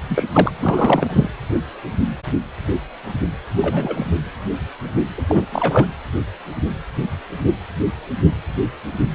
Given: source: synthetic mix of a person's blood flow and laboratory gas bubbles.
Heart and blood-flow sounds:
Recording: Doppler ultrasound of blood flow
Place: precordium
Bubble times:
0.09-0.24 s: bubbles
0.33-0.51 s: bubbles
0.61-1.29 s: bubbles
3.48-4.12 s: bubbles
5.17-5.22 s: bubbles
5.29-5.46 s: bubbles
5.52-5.86 s: bubbles
From the record:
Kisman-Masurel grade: 223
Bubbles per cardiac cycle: several, 3 to 8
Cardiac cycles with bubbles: 10 to 50%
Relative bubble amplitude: loud (0.450 to 0.775)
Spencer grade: 2 (many but less than half of the cardiac periods contain bubble signals, singularly or in groups)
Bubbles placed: anywhere in the cardiac cycle

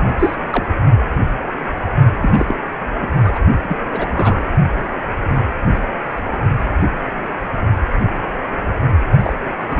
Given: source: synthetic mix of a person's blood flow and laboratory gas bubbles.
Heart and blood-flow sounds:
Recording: Doppler ultrasound of blood flow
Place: precordium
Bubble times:
0.19-0.36 s: bubbles
0.51-0.64 s: bubbles
2.22-2.56 s: bubbles
3.01-3.10 s: bubbles
3.23-3.39 s: bubbles
3.69-3.76 s: bubbles
3.92-4.48 s: bubbles
9.23-9.33 s: bubbles
9.69-9.80 s: bubbles
From the record:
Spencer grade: 3 (all of the cardiac periods contain showers or single bubble signals, but not dominating or overriding the cardiac motion signals)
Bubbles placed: only in the low amplitude regions of the cardiac cycle

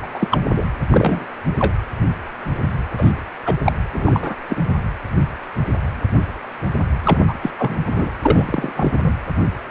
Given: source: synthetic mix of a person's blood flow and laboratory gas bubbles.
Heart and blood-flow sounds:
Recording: Doppler ultrasound of blood flow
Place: precordium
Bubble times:
0.02-0.07 s: bubbles
0.13-0.28 s: bubbles
0.30-0.40 s: bubbles
0.56-0.66 s: bubbles
0.89-1.25 s: bubbles
1.58-1.73 s: bubbles
2.97-3.12 s: bubbles
3.45-3.56 s: bubbles
3.66-3.72 s: bubbles
3.94-4.36 s: bubbles
4.50-4.56 s: bubbles
7.03-7.20 s: bubbles
7.27-7.33 s: bubbles
7.42-7.50 s: bubbles
7.58-7.76 s: bubbles
7.86-8.09 s: bubbles
8.21-8.72 s: bubbles
8.76-9.13 s: bubbles
From the record:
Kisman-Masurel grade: 233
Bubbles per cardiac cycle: several, 3 to 8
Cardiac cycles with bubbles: 50 to 99%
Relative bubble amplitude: loud (0.450 to 0.775)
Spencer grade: 3 (all of the cardiac periods contain showers or single bubble signals, but not dominating or overriding the cardiac motion signals)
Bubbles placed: anywhere in the cardiac cycle

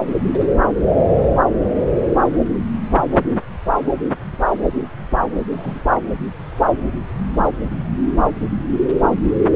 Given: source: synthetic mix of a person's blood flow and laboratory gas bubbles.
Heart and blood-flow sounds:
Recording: Doppler ultrasound of blood flow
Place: subclavian vein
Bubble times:
5.52-5.80 s: bubbles
5.88-6.00 s: bubbles
From the record:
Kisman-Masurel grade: 211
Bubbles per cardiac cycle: several, 3 to 8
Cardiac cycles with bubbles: 1 to 10%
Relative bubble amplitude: barely perceptible (0.100 to 0.250)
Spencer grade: 1 (occasional bubble signal discernible with the cardiac motion signal, with majority of cardiac periods free of bubbles)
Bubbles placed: anywhere in the cardiac cycle

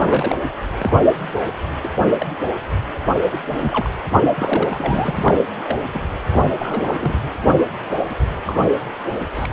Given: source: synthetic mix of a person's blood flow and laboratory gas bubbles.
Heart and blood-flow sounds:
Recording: Doppler ultrasound of blood flow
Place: precordium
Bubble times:
0.00-0.35 s: bubbles
0.78-1.00 s: bubbles
1.84-1.89 s: bubbles
2.03-2.12 s: bubbles
2.19-2.26 s: bubbles
3.24-3.39 s: bubbles
3.60-3.88 s: bubbles
4.34-5.40 s: bubbles
5.68-5.75 s: bubbles
5.92-6.02 s: bubbles
6.30-6.46 s: bubbles
6.54-7.19 s: bubbles
7.22-7.29 s: bubbles
7.46-7.53 s: bubbles
8.09-8.15 s: bubbles
8.46-8.63 s: bubbles
9.35-9.46 s: bubbles
From the record:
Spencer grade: 3 (all of the cardiac periods contain showers or single bubble signals, but not dominating or overriding the cardiac motion signals)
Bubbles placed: anywhere in the cardiac cycle

